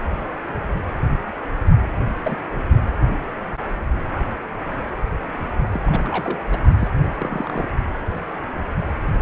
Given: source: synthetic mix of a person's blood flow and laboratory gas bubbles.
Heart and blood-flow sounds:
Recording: Doppler ultrasound of blood flow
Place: precordium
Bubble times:
1.81-1.88 s: bubbles
2.23-2.36 s: bubbles
5.73-5.80 s: bubbles
5.83-6.39 s: bubbles
6.51-6.58 s: bubbles
6.78-6.89 s: bubbles
7.18-7.67 s: bubbles
From the record:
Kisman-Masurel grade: 221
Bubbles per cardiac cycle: several, 3 to 8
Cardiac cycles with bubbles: 10 to 50%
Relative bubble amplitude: barely perceptible (0.100 to 0.250)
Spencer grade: 2 (many but less than half of the cardiac periods contain bubble signals, singularly or in groups)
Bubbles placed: only in the low amplitude regions of the cardiac cycle

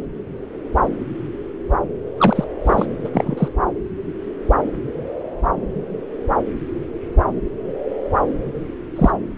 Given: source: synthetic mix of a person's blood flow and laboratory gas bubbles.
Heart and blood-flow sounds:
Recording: Doppler ultrasound of blood flow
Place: subclavian vein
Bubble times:
2.18-2.44 s: bubbles
2.66-2.86 s: bubbles
3.04-3.10 s: bubbles
3.13-3.48 s: bubbles
8.96-9.12 s: bubbles
9.26-9.38 s: bubbles
From the record:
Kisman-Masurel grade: 222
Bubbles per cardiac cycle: several, 3 to 8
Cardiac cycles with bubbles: 10 to 50%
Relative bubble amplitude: moderate (0.250 to 0.450)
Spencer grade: 2 (many but less than half of the cardiac periods contain bubble signals, singularly or in groups)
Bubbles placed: anywhere in the cardiac cycle

